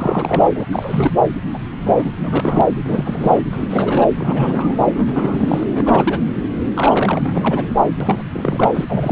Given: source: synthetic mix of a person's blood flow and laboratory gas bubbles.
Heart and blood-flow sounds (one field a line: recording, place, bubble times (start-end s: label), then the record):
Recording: Doppler ultrasound of blood flow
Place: subclavian vein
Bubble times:
0.00-0.49 s: bubbles
0.54-0.65 s: bubbles
0.72-1.12 s: bubbles
1.53-1.58 s: bubbles
1.85-2.12 s: bubbles
2.23-2.61 s: bubbles
2.84-3.42 s: bubbles
3.53-4.05 s: bubbles
4.14-4.84 s: bubbles
4.92-5.67 s: bubbles
5.74-6.20 s: bubbles
6.35-6.45 s: bubbles
6.74-7.65 s: bubbles
8.00-8.23 s: bubbles
8.32-8.71 s: bubbles
8.73-8.85 s: bubbles
8.88-9.12 s: bubbles
From the record:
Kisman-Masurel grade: 342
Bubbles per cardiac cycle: rolling drumbeat, 9 or more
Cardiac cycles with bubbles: 100%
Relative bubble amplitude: moderate (0.250 to 0.450)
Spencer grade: 3 (all of the cardiac periods contain showers or single bubble signals, but not dominating or overriding the cardiac motion signals)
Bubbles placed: anywhere in the cardiac cycle